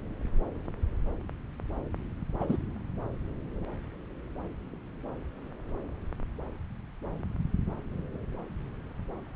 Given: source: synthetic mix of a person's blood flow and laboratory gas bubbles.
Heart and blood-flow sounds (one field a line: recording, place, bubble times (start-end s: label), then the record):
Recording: Doppler ultrasound of blood flow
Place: subclavian vein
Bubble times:
2.40-2.57 s: bubbles
From the record:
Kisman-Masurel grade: 112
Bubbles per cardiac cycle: 1 to 2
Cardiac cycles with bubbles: 1 to 10%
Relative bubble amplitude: moderate (0.250 to 0.450)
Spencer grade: 1 (occasional bubble signal discernible with the cardiac motion signal, with majority of cardiac periods free of bubbles)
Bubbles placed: anywhere in the cardiac cycle